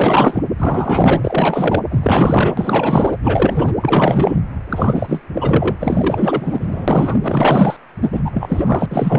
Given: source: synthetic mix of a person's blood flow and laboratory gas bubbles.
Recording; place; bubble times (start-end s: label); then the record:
Doppler ultrasound of blood flow; precordium
0.00-0.43 s: bubbles
0.57-1.80 s: bubbles
1.90-3.17 s: bubbles
3.23-3.73 s: bubbles
3.80-4.36 s: bubbles
4.69-5.22 s: bubbles
5.33-5.76 s: bubbles
5.79-7.18 s: bubbles
7.23-7.76 s: bubbles
8.01-8.86 s: bubbles
8.90-9.19 s: bubbles
From the record:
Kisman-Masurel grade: 444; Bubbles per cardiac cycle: continuous sound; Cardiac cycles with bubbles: 100%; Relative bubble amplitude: maximal (0.775 to 0.999); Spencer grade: 4 (maximum detectable bubble signal sounding continuously throughout systole and diastole of every cardiac period, and overriding the amplitude of the normal cardiac signals); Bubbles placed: anywhere in the cardiac cycle